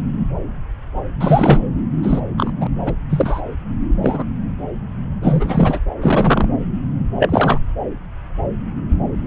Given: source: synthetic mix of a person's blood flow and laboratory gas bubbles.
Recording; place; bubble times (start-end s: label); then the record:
Doppler ultrasound of blood flow; subclavian vein
1.21-1.59 s: bubbles
2.03-2.20 s: bubbles
2.37-2.51 s: bubbles
2.61-2.67 s: bubbles
2.86-2.93 s: bubbles
3.09-3.41 s: bubbles
4.02-4.24 s: bubbles
5.22-5.79 s: bubbles
6.01-6.49 s: bubbles
7.19-7.59 s: bubbles
From the record:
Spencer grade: 2 (many but less than half of the cardiac periods contain bubble signals, singularly or in groups); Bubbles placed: anywhere in the cardiac cycle